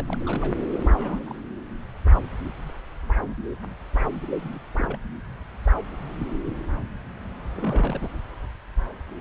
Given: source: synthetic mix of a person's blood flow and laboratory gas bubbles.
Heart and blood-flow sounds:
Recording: Doppler ultrasound of blood flow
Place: subclavian vein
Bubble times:
0.00-0.17 s: bubbles
0.26-0.58 s: bubbles
0.70-1.40 s: bubbles
4.35-4.58 s: bubbles
4.75-4.97 s: bubbles
7.54-8.09 s: bubbles
From the record:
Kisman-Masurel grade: 221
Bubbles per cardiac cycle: several, 3 to 8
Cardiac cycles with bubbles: 10 to 50%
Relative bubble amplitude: barely perceptible (0.100 to 0.250)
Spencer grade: 2 (many but less than half of the cardiac periods contain bubble signals, singularly or in groups)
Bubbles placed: anywhere in the cardiac cycle

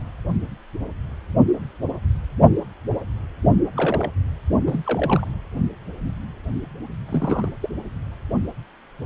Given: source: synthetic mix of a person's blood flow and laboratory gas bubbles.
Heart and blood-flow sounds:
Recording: Doppler ultrasound of blood flow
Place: precordium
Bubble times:
3.77-4.10 s: bubbles
4.67-5.28 s: bubbles
7.07-7.49 s: bubbles
7.62-7.70 s: bubbles
From the record:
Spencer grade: 2 (many but less than half of the cardiac periods contain bubble signals, singularly or in groups)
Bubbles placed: only in the low amplitude regions of the cardiac cycle

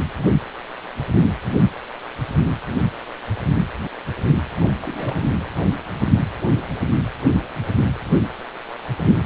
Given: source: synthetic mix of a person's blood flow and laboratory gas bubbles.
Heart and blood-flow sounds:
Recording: Doppler ultrasound of blood flow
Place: precordium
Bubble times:
4.60-4.68 s: bubbles
4.79-5.33 s: bubbles
From the record:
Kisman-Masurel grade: 211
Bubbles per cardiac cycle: several, 3 to 8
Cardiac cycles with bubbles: 1 to 10%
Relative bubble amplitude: barely perceptible (0.100 to 0.250)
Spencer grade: 1 (occasional bubble signal discernible with the cardiac motion signal, with majority of cardiac periods free of bubbles)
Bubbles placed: anywhere in the cardiac cycle

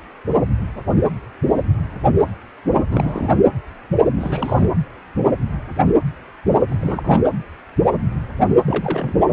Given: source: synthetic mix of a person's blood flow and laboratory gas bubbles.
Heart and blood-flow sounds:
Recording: Doppler ultrasound of blood flow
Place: precordium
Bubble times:
2.90-3.34 s: bubbles
4.16-4.66 s: bubbles
6.69-7.21 s: bubbles
8.65-9.23 s: bubbles
From the record:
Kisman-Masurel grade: 222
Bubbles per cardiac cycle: several, 3 to 8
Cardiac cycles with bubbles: 10 to 50%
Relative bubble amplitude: moderate (0.250 to 0.450)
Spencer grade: 2 (many but less than half of the cardiac periods contain bubble signals, singularly or in groups)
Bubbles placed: anywhere in the cardiac cycle

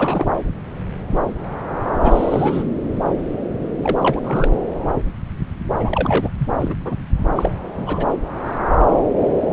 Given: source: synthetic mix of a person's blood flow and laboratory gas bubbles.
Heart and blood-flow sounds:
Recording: Doppler ultrasound of blood flow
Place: subclavian vein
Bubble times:
0.00-0.28 s: bubbles
2.00-2.63 s: bubbles
3.83-3.96 s: bubbles
3.99-4.20 s: bubbles
4.24-4.49 s: bubbles
5.79-6.29 s: bubbles
6.38-6.49 s: bubbles
6.58-6.75 s: bubbles
6.84-6.95 s: bubbles
7.35-7.51 s: bubbles
7.77-8.06 s: bubbles
9.51-9.53 s: bubbles
From the record:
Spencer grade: 2 (many but less than half of the cardiac periods contain bubble signals, singularly or in groups)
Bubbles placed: anywhere in the cardiac cycle

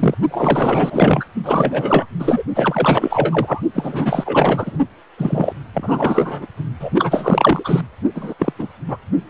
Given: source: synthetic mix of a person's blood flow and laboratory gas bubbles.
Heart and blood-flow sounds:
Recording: Doppler ultrasound of blood flow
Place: precordium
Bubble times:
0.00-0.14 s: bubbles
0.30-1.25 s: bubbles
1.44-2.06 s: bubbles
2.19-2.43 s: bubbles
2.56-3.61 s: bubbles
3.74-4.77 s: bubbles
5.17-5.53 s: bubbles
5.74-6.46 s: bubbles
6.79-6.91 s: bubbles
6.94-7.81 s: bubbles
8.15-8.34 s: bubbles
8.38-8.53 s: bubbles
8.59-8.68 s: bubbles
8.88-8.97 s: bubbles
From the record:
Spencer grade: 4 (maximum detectable bubble signal sounding continuously throughout systole and diastole of every cardiac period, and overriding the amplitude of the normal cardiac signals)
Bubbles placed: only in the low amplitude regions of the cardiac cycle

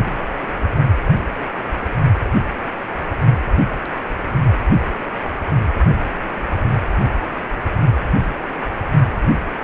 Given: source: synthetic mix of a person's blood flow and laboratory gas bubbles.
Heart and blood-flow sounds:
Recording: Doppler ultrasound of blood flow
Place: precordium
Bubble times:
0.00-0.52 s: bubbles
From the record:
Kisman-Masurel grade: 111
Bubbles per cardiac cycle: 1 to 2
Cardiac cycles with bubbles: 1 to 10%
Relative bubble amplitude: barely perceptible (0.100 to 0.250)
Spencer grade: 1 (occasional bubble signal discernible with the cardiac motion signal, with majority of cardiac periods free of bubbles)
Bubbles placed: only in the low amplitude regions of the cardiac cycle

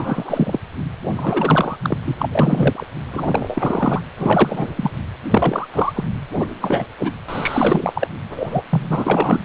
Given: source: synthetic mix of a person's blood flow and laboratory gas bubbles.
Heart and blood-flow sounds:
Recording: Doppler ultrasound of blood flow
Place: precordium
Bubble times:
0.00-0.59 s: bubbles
1.15-1.78 s: bubbles
1.82-1.98 s: bubbles
2.04-2.16 s: bubbles
2.19-2.87 s: bubbles
3.12-4.01 s: bubbles
4.17-4.67 s: bubbles
4.76-4.90 s: bubbles
5.30-5.67 s: bubbles
5.73-6.04 s: bubbles
6.39-6.47 s: bubbles
6.60-6.86 s: bubbles
6.99-7.11 s: bubbles
7.28-8.07 s: bubbles
8.29-8.62 s: bubbles
8.69-9.40 s: bubbles
From the record:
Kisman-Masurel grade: 343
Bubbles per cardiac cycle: rolling drumbeat, 9 or more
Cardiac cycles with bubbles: 100%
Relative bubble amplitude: loud (0.450 to 0.775)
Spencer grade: 3 (all of the cardiac periods contain showers or single bubble signals, but not dominating or overriding the cardiac motion signals)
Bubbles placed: anywhere in the cardiac cycle

